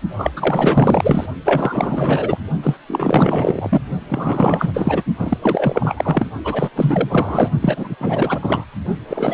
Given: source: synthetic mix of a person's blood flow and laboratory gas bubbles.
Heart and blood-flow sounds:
Doppler ultrasound of blood flow; precordium
0.17-1.26 s: bubbles
1.44-2.38 s: bubbles
2.62-2.77 s: bubbles
2.88-3.81 s: bubbles
4.09-5.03 s: bubbles
5.19-5.38 s: bubbles
5.42-6.30 s: bubbles
6.44-6.70 s: bubbles
6.75-7.51 s: bubbles
7.61-7.96 s: bubbles
7.99-8.65 s: bubbles
9.07-9.34 s: bubbles
From the record:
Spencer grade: 4 (maximum detectable bubble signal sounding continuously throughout systole and diastole of every cardiac period, and overriding the amplitude of the normal cardiac signals); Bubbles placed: only in the low amplitude regions of the cardiac cycle

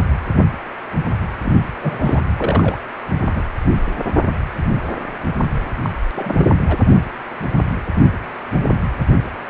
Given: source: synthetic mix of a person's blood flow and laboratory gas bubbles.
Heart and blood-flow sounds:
Doppler ultrasound of blood flow; precordium
1.42-1.53 s: bubbles
1.81-2.20 s: bubbles
2.38-2.76 s: bubbles
3.14-3.42 s: bubbles
5.82-5.90 s: bubbles
6.14-6.46 s: bubbles
6.68-6.77 s: bubbles
From the record:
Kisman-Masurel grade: 222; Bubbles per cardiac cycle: several, 3 to 8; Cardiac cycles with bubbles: 10 to 50%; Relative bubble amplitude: moderate (0.250 to 0.450); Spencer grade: 2 (many but less than half of the cardiac periods contain bubble signals, singularly or in groups); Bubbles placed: anywhere in the cardiac cycle

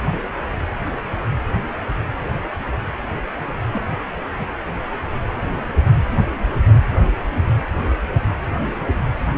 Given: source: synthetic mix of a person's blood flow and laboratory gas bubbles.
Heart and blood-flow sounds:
Doppler ultrasound of blood flow; precordium
3.73-3.95 s: bubbles
4.39-4.45 s: bubbles
From the record:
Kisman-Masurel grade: 111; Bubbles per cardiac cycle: 1 to 2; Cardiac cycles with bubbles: 1 to 10%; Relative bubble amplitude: barely perceptible (0.100 to 0.250); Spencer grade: 1 (occasional bubble signal discernible with the cardiac motion signal, with majority of cardiac periods free of bubbles); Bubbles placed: anywhere in the cardiac cycle

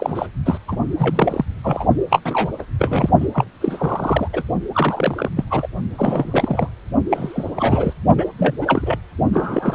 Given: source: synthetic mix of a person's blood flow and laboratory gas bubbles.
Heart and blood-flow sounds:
Doppler ultrasound of blood flow; precordium
0.00-0.27 s: bubbles
0.46-0.58 s: bubbles
0.68-0.76 s: bubbles
0.99-1.45 s: bubbles
1.62-1.85 s: bubbles
2.10-2.20 s: bubbles
2.24-2.51 s: bubbles
2.58-2.63 s: bubbles
2.79-3.10 s: bubbles
3.20-3.27 s: bubbles
3.34-3.45 s: bubbles
3.60-4.28 s: bubbles
4.33-4.42 s: bubbles
4.74-5.29 s: bubbles
5.36-5.44 s: bubbles
5.50-5.67 s: bubbles
5.98-6.69 s: bubbles
7.11-7.52 s: bubbles
7.56-7.94 s: bubbles
8.17-8.25 s: bubbles
8.38-8.55 s: bubbles
8.61-8.97 s: bubbles
9.32-9.75 s: bubbles
From the record:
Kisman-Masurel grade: 342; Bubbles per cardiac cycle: rolling drumbeat, 9 or more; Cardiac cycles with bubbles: 100%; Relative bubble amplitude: moderate (0.250 to 0.450); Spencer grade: 3 (all of the cardiac periods contain showers or single bubble signals, but not dominating or overriding the cardiac motion signals); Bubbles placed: only in the low amplitude regions of the cardiac cycle

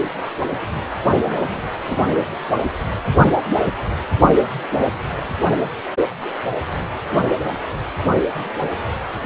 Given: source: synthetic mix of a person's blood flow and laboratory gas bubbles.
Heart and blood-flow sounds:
Doppler ultrasound of blood flow; precordium
1.26-1.70 s: bubbles
1.84-2.08 s: bubbles
From the record:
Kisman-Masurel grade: 211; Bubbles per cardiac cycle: several, 3 to 8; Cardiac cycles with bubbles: 1 to 10%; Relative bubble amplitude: barely perceptible (0.100 to 0.250); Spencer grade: 1 (occasional bubble signal discernible with the cardiac motion signal, with majority of cardiac periods free of bubbles); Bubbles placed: anywhere in the cardiac cycle

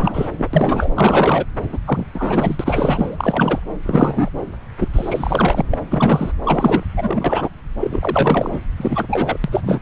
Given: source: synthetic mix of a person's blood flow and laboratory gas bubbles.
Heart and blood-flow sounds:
Doppler ultrasound of blood flow; subclavian vein
0.00-0.29 s: bubbles
0.38-0.49 s: bubbles
0.53-0.90 s: bubbles
0.94-1.45 s: bubbles
1.69-1.78 s: bubbles
1.86-2.05 s: bubbles
2.14-3.17 s: bubbles
3.20-3.60 s: bubbles
3.85-4.30 s: bubbles
4.79-4.88 s: bubbles
4.93-5.62 s: bubbles
5.70-5.78 s: bubbles
5.90-6.31 s: bubbles
6.43-6.83 s: bubbles
6.96-7.50 s: bubbles
7.80-8.59 s: bubbles
8.78-9.38 s: bubbles
9.44-9.82 s: bubbles
From the record:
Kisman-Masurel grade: 343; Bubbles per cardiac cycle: rolling drumbeat, 9 or more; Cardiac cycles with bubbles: 100%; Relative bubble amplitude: loud (0.450 to 0.775); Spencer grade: 3 (all of the cardiac periods contain showers or single bubble signals, but not dominating or overriding the cardiac motion signals); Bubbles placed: anywhere in the cardiac cycle

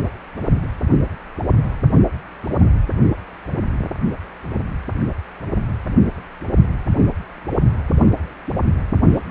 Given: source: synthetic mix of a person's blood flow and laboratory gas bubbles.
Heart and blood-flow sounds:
Doppler ultrasound of blood flow; precordium
2.43-2.50 s: bubbles
From the record:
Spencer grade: 1 (occasional bubble signal discernible with the cardiac motion signal, with majority of cardiac periods free of bubbles); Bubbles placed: anywhere in the cardiac cycle

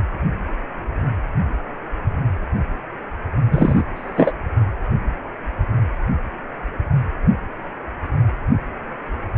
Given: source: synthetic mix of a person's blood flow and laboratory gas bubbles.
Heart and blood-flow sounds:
Doppler ultrasound of blood flow; precordium
3.50-3.84 s: bubbles
3.96-4.33 s: bubbles
From the record:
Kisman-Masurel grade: 223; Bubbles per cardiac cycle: several, 3 to 8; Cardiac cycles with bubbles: 10 to 50%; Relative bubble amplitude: loud (0.450 to 0.775); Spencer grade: 2 (many but less than half of the cardiac periods contain bubble signals, singularly or in groups); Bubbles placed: anywhere in the cardiac cycle

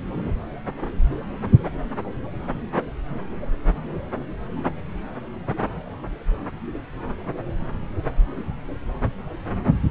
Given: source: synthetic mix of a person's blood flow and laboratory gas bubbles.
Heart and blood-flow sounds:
Doppler ultrasound of blood flow; subclavian vein
9.88-9.91 s: bubbles
From the record:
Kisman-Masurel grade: 122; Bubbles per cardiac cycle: 1 to 2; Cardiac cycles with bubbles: 10 to 50%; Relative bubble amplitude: moderate (0.250 to 0.450); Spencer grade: 2 (many but less than half of the cardiac periods contain bubble signals, singularly or in groups); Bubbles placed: anywhere in the cardiac cycle

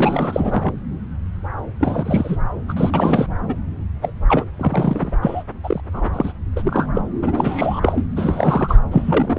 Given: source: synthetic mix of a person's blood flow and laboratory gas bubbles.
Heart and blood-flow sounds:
Doppler ultrasound of blood flow; subclavian vein
0.00-0.72 s: bubbles
1.80-2.36 s: bubbles
2.68-2.73 s: bubbles
2.76-2.90 s: bubbles
2.93-3.26 s: bubbles
3.48-3.55 s: bubbles
4.03-4.12 s: bubbles
4.28-4.46 s: bubbles
4.58-5.13 s: bubbles
5.21-5.43 s: bubbles
5.64-5.81 s: bubbles
5.93-6.10 s: bubbles
6.12-6.33 s: bubbles
6.56-6.87 s: bubbles
6.95-7.02 s: bubbles
7.22-8.07 s: bubbles
8.16-8.78 s: bubbles
8.91-9.39 s: bubbles
From the record:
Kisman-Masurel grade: 332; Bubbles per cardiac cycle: rolling drumbeat, 9 or more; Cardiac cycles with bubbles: 50 to 99%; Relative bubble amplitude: moderate (0.250 to 0.450); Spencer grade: 3 (all of the cardiac periods contain showers or single bubble signals, but not dominating or overriding the cardiac motion signals); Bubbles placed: anywhere in the cardiac cycle

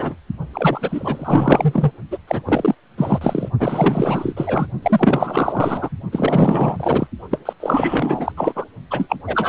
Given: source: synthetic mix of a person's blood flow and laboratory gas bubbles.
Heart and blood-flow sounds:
Doppler ultrasound of blood flow; precordium
0.00-0.15 s: bubbles
0.53-1.92 s: bubbles
2.10-2.18 s: bubbles
2.28-2.42 s: bubbles
2.46-2.75 s: bubbles
2.97-3.49 s: bubbles
3.59-4.67 s: bubbles
4.82-5.89 s: bubbles
6.12-6.76 s: bubbles
6.79-7.07 s: bubbles
7.30-7.38 s: bubbles
7.45-7.53 s: bubbles
7.60-8.32 s: bubbles
8.37-8.65 s: bubbles
8.90-9.16 s: bubbles
9.27-9.48 s: bubbles
From the record:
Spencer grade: 4 (maximum detectable bubble signal sounding continuously throughout systole and diastole of every cardiac period, and overriding the amplitude of the normal cardiac signals); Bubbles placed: only in the low amplitude regions of the cardiac cycle

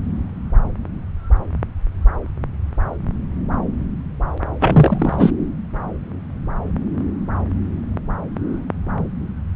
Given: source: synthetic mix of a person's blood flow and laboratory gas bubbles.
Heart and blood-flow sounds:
Doppler ultrasound of blood flow; subclavian vein
4.60-5.32 s: bubbles
From the record:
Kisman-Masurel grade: 223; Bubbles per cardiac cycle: several, 3 to 8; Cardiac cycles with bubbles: 10 to 50%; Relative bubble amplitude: loud (0.450 to 0.775); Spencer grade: 2 (many but less than half of the cardiac periods contain bubble signals, singularly or in groups); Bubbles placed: anywhere in the cardiac cycle

